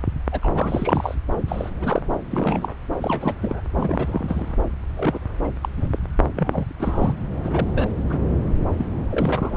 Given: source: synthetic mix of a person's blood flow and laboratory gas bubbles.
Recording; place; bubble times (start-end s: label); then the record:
Doppler ultrasound of blood flow; subclavian vein
0.32-0.39 s: bubbles
0.42-1.15 s: bubbles
1.48-1.69 s: bubbles
1.81-2.02 s: bubbles
2.31-2.73 s: bubbles
3.02-3.34 s: bubbles
3.42-3.60 s: bubbles
3.75-4.54 s: bubbles
4.96-5.19 s: bubbles
5.44-5.50 s: bubbles
5.61-5.69 s: bubbles
5.77-5.99 s: bubbles
6.36-6.66 s: bubbles
6.79-7.14 s: bubbles
7.44-7.67 s: bubbles
7.73-7.90 s: bubbles
8.08-8.19 s: bubbles
8.77-8.85 s: bubbles
9.10-9.57 s: bubbles
From the record:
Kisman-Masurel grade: 242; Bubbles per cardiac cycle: several, 3 to 8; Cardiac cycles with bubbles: 100%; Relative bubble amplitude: moderate (0.250 to 0.450); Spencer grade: 3 (all of the cardiac periods contain showers or single bubble signals, but not dominating or overriding the cardiac motion signals); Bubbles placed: anywhere in the cardiac cycle